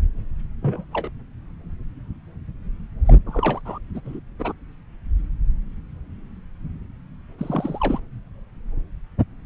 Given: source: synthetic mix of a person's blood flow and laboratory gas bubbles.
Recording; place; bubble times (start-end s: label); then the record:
Doppler ultrasound of blood flow; subclavian vein
0.62-0.84 s: bubbles
0.93-1.09 s: bubbles
3.06-3.14 s: bubbles
3.26-3.61 s: bubbles
3.65-3.79 s: bubbles
3.94-4.00 s: bubbles
4.04-4.19 s: bubbles
4.38-4.53 s: bubbles
7.38-8.00 s: bubbles
From the record:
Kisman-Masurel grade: 221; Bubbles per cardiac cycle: several, 3 to 8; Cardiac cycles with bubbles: 10 to 50%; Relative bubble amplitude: barely perceptible (0.100 to 0.250); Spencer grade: 2 (many but less than half of the cardiac periods contain bubble signals, singularly or in groups); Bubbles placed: anywhere in the cardiac cycle